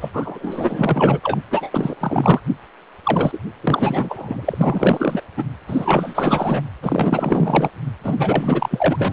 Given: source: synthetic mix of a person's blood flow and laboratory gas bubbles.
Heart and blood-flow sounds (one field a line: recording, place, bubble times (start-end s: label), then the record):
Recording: Doppler ultrasound of blood flow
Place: precordium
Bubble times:
0.00-0.10 s: bubbles
0.13-1.20 s: bubbles
1.23-1.39 s: bubbles
1.51-1.95 s: bubbles
2.00-2.40 s: bubbles
3.03-3.38 s: bubbles
3.62-5.22 s: bubbles
5.37-5.46 s: bubbles
5.67-6.62 s: bubbles
6.82-7.71 s: bubbles
8.03-9.13 s: bubbles
From the record:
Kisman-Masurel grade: 444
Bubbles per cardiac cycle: continuous sound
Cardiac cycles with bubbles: 100%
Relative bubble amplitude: maximal (0.775 to 0.999)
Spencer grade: 4 (maximum detectable bubble signal sounding continuously throughout systole and diastole of every cardiac period, and overriding the amplitude of the normal cardiac signals)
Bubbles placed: anywhere in the cardiac cycle